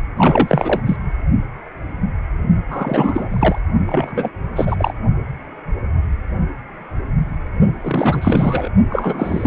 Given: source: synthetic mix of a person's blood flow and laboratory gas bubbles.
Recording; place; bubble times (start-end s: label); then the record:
Doppler ultrasound of blood flow; precordium
0.17-0.81 s: bubbles
0.85-0.97 s: bubbles
2.71-3.60 s: bubbles
3.86-4.29 s: bubbles
4.55-4.93 s: bubbles
7.81-8.69 s: bubbles
8.89-9.47 s: bubbles
From the record:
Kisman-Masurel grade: 333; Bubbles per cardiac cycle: rolling drumbeat, 9 or more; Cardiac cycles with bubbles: 50 to 99%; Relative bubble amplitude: loud (0.450 to 0.775); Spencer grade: 3 (all of the cardiac periods contain showers or single bubble signals, but not dominating or overriding the cardiac motion signals); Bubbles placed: only in the low amplitude regions of the cardiac cycle